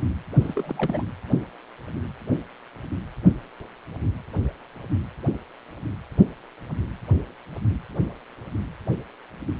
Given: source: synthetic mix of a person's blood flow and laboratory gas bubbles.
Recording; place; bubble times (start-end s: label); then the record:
Doppler ultrasound of blood flow; precordium
0.40-1.03 s: bubbles
From the record:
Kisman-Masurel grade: 211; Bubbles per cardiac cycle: several, 3 to 8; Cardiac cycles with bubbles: 1 to 10%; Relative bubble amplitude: barely perceptible (0.100 to 0.250); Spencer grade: 1 (occasional bubble signal discernible with the cardiac motion signal, with majority of cardiac periods free of bubbles); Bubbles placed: anywhere in the cardiac cycle